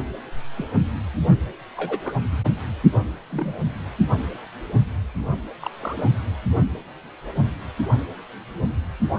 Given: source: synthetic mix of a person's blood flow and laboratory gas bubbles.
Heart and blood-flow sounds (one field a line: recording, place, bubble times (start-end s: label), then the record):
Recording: Doppler ultrasound of blood flow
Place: precordium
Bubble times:
0.57-0.66 s: bubbles
1.76-1.99 s: bubbles
2.04-2.13 s: bubbles
2.92-2.99 s: bubbles
3.31-3.58 s: bubbles
5.62-5.71 s: bubbles
5.73-6.12 s: bubbles
From the record:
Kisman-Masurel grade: 121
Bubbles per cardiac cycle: 1 to 2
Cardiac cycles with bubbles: 10 to 50%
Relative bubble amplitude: barely perceptible (0.100 to 0.250)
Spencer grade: 2 (many but less than half of the cardiac periods contain bubble signals, singularly or in groups)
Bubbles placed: only in the low amplitude regions of the cardiac cycle